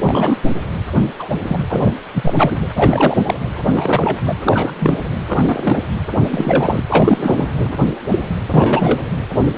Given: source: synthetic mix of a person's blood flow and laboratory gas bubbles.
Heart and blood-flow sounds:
Doppler ultrasound of blood flow; precordium
0.02-0.37 s: bubbles
1.00-1.11 s: bubbles
1.19-1.28 s: bubbles
1.45-1.57 s: bubbles
1.69-1.93 s: bubbles
2.13-2.33 s: bubbles
2.38-2.58 s: bubbles
2.76-3.34 s: bubbles
3.75-4.18 s: bubbles
4.26-4.34 s: bubbles
4.44-4.72 s: bubbles
4.79-4.94 s: bubbles
5.27-5.79 s: bubbles
6.30-6.82 s: bubbles
6.89-7.17 s: bubbles
7.19-7.46 s: bubbles
7.64-7.74 s: bubbles
8.11-8.38 s: bubbles
8.52-9.02 s: bubbles
9.50-9.58 s: bubbles
From the record:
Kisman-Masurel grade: 243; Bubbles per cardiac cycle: several, 3 to 8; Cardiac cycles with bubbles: 100%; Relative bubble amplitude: loud (0.450 to 0.775); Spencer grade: 3 (all of the cardiac periods contain showers or single bubble signals, but not dominating or overriding the cardiac motion signals); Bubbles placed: anywhere in the cardiac cycle

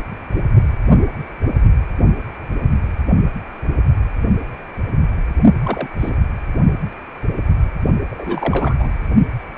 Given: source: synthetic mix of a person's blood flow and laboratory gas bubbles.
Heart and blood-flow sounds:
Doppler ultrasound of blood flow; precordium
5.63-5.89 s: bubbles
6.00-6.20 s: bubbles
8.10-8.93 s: bubbles
From the record:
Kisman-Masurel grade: 222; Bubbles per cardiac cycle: several, 3 to 8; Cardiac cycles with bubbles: 10 to 50%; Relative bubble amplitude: moderate (0.250 to 0.450); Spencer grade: 2 (many but less than half of the cardiac periods contain bubble signals, singularly or in groups); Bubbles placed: only in the low amplitude regions of the cardiac cycle

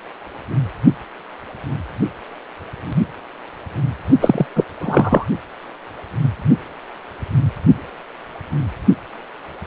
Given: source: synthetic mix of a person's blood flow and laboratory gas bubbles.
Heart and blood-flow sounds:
Doppler ultrasound of blood flow; precordium
4.21-4.46 s: bubbles
4.55-4.64 s: bubbles
4.80-5.26 s: bubbles
From the record:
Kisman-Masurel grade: 213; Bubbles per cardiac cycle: several, 3 to 8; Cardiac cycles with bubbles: 1 to 10%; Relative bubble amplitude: loud (0.450 to 0.775); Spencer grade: 1 (occasional bubble signal discernible with the cardiac motion signal, with majority of cardiac periods free of bubbles); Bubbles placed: only in the low amplitude regions of the cardiac cycle

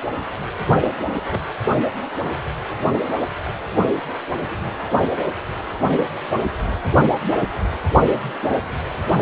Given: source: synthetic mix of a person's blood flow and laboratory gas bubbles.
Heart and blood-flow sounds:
Doppler ultrasound of blood flow; precordium
0.80-0.89 s: bubbles
1.31-1.40 s: bubbles
From the record:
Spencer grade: 1 (occasional bubble signal discernible with the cardiac motion signal, with majority of cardiac periods free of bubbles); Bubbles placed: only in the low amplitude regions of the cardiac cycle

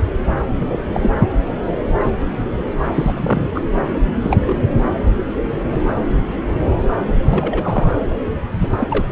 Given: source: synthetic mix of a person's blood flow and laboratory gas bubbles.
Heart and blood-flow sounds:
Doppler ultrasound of blood flow; subclavian vein
0.56-0.77 s: bubbles
0.94-1.10 s: bubbles
2.94-3.50 s: bubbles
3.54-3.62 s: bubbles
4.22-4.39 s: bubbles
4.46-4.63 s: bubbles
7.07-7.13 s: bubbles
7.21-7.87 s: bubbles
8.61-8.78 s: bubbles
8.80-8.88 s: bubbles
8.90-9.06 s: bubbles
From the record:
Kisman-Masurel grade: 232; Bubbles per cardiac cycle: several, 3 to 8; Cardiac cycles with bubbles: 50 to 99%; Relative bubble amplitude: moderate (0.250 to 0.450); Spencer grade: 3 (all of the cardiac periods contain showers or single bubble signals, but not dominating or overriding the cardiac motion signals); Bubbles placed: anywhere in the cardiac cycle

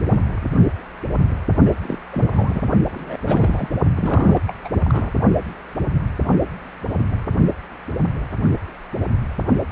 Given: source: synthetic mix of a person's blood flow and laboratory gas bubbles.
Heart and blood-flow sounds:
Doppler ultrasound of blood flow; precordium
1.65-1.73 s: bubbles
1.81-1.98 s: bubbles
2.11-2.61 s: bubbles
2.91-3.17 s: bubbles
3.24-3.70 s: bubbles
3.95-4.41 s: bubbles
4.47-4.54 s: bubbles
4.64-4.69 s: bubbles
4.83-5.12 s: bubbles
From the record:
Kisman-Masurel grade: 221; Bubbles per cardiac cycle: several, 3 to 8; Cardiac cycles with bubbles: 10 to 50%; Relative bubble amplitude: barely perceptible (0.100 to 0.250); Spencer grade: 2 (many but less than half of the cardiac periods contain bubble signals, singularly or in groups); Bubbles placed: only in the low amplitude regions of the cardiac cycle

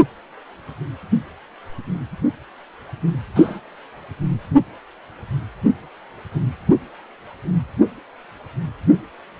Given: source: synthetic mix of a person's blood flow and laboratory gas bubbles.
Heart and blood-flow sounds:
Doppler ultrasound of blood flow; precordium
3.35-3.60 s: bubbles
From the record:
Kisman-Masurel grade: 113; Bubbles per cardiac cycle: 1 to 2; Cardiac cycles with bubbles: 1 to 10%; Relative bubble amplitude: loud (0.450 to 0.775); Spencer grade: 1 (occasional bubble signal discernible with the cardiac motion signal, with majority of cardiac periods free of bubbles); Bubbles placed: anywhere in the cardiac cycle

